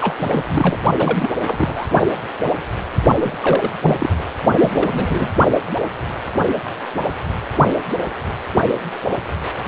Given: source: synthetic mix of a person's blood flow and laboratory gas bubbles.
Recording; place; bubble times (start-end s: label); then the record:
Doppler ultrasound of blood flow; precordium
0.01-0.14 s: bubbles
0.18-0.45 s: bubbles
0.48-0.78 s: bubbles
0.98-1.30 s: bubbles
1.44-1.87 s: bubbles
3.20-3.38 s: bubbles
3.41-3.71 s: bubbles
3.82-3.94 s: bubbles
3.98-4.10 s: bubbles
4.19-4.24 s: bubbles
4.60-5.33 s: bubbles
From the record:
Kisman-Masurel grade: 332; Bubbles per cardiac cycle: rolling drumbeat, 9 or more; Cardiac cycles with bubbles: 50 to 99%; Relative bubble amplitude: moderate (0.250 to 0.450); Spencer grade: 3 (all of the cardiac periods contain showers or single bubble signals, but not dominating or overriding the cardiac motion signals); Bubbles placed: only in the low amplitude regions of the cardiac cycle